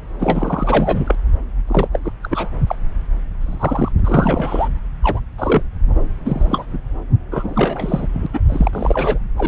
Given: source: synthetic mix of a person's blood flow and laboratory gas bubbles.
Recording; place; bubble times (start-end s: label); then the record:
Doppler ultrasound of blood flow; subclavian vein
0.19-1.15 s: bubbles
1.67-1.89 s: bubbles
1.93-1.99 s: bubbles
2.04-2.12 s: bubbles
2.22-2.56 s: bubbles
2.67-2.75 s: bubbles
3.41-3.92 s: bubbles
3.99-4.01 s: bubbles
4.04-4.68 s: bubbles
5.02-5.20 s: bubbles
5.38-5.62 s: bubbles
6.25-6.66 s: bubbles
6.71-6.79 s: bubbles
7.31-8.07 s: bubbles
8.13-8.27 s: bubbles
8.33-8.40 s: bubbles
8.48-9.19 s: bubbles
9.37-9.48 s: bubbles
From the record:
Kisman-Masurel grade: 243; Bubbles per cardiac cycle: several, 3 to 8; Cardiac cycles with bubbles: 100%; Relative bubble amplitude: loud (0.450 to 0.775); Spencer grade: 3 (all of the cardiac periods contain showers or single bubble signals, but not dominating or overriding the cardiac motion signals); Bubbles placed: anywhere in the cardiac cycle